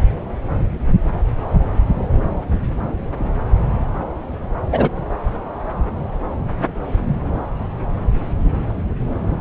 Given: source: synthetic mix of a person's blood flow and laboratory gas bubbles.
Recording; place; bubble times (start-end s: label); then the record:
Doppler ultrasound of blood flow; subclavian vein
4.71-4.89 s: bubbles
From the record:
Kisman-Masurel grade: 113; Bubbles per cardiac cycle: 1 to 2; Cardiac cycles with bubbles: 1 to 10%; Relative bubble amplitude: loud (0.450 to 0.775); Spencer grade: 1 (occasional bubble signal discernible with the cardiac motion signal, with majority of cardiac periods free of bubbles); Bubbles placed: anywhere in the cardiac cycle